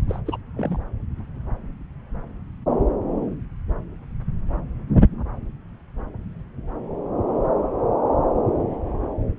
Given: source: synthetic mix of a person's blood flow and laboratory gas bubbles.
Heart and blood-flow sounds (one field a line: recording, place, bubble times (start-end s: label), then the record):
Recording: Doppler ultrasound of blood flow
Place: subclavian vein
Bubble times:
0.09-0.20 s: bubbles
0.26-0.37 s: bubbles
0.56-0.79 s: bubbles
From the record:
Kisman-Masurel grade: 212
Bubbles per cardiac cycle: several, 3 to 8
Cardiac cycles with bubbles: 1 to 10%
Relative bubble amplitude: moderate (0.250 to 0.450)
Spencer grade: 1 (occasional bubble signal discernible with the cardiac motion signal, with majority of cardiac periods free of bubbles)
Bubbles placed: anywhere in the cardiac cycle